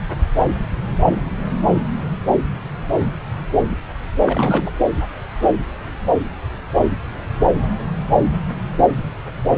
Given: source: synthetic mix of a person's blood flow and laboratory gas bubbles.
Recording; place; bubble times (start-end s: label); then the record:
Doppler ultrasound of blood flow; subclavian vein
4.26-4.71 s: bubbles
From the record:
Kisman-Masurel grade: 212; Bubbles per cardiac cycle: several, 3 to 8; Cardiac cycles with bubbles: 1 to 10%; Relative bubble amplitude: moderate (0.250 to 0.450); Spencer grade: 1 (occasional bubble signal discernible with the cardiac motion signal, with majority of cardiac periods free of bubbles); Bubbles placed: anywhere in the cardiac cycle